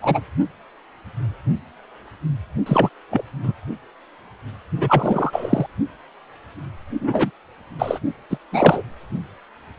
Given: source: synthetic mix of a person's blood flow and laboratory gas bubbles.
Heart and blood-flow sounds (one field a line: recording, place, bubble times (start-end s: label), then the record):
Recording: Doppler ultrasound of blood flow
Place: precordium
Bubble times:
0.01-0.20 s: bubbles
2.66-2.89 s: bubbles
3.10-3.23 s: bubbles
3.42-3.52 s: bubbles
4.78-5.66 s: bubbles
7.01-7.31 s: bubbles
7.79-7.99 s: bubbles
8.30-8.38 s: bubbles
8.52-8.82 s: bubbles
From the record:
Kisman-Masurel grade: 233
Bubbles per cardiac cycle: several, 3 to 8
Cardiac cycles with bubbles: 50 to 99%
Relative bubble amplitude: loud (0.450 to 0.775)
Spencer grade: 3 (all of the cardiac periods contain showers or single bubble signals, but not dominating or overriding the cardiac motion signals)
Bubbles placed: only in the low amplitude regions of the cardiac cycle